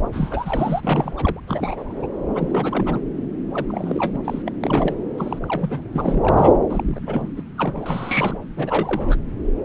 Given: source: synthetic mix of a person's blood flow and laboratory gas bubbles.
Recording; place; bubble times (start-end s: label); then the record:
Doppler ultrasound of blood flow; subclavian vein
0.12-1.40 s: bubbles
1.47-2.07 s: bubbles
2.34-3.00 s: bubbles
3.52-3.65 s: bubbles
3.68-4.20 s: bubbles
4.24-4.43 s: bubbles
4.46-4.52 s: bubbles
4.64-4.95 s: bubbles
5.18-5.39 s: bubbles
5.42-5.83 s: bubbles
5.95-6.53 s: bubbles
6.70-7.00 s: bubbles
7.07-7.29 s: bubbles
7.37-7.43 s: bubbles
7.58-8.38 s: bubbles
8.57-9.18 s: bubbles
From the record:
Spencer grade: 3 (all of the cardiac periods contain showers or single bubble signals, but not dominating or overriding the cardiac motion signals); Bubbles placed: anywhere in the cardiac cycle